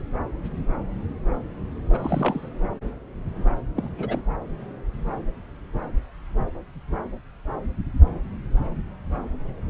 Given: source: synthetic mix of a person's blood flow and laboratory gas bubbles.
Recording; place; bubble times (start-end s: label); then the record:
Doppler ultrasound of blood flow; subclavian vein
1.90-2.49 s: bubbles
3.76-3.89 s: bubbles
3.98-4.22 s: bubbles
From the record:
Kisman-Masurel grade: 221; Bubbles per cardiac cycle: several, 3 to 8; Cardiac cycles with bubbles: 10 to 50%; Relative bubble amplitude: barely perceptible (0.100 to 0.250); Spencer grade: 2 (many but less than half of the cardiac periods contain bubble signals, singularly or in groups); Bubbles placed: anywhere in the cardiac cycle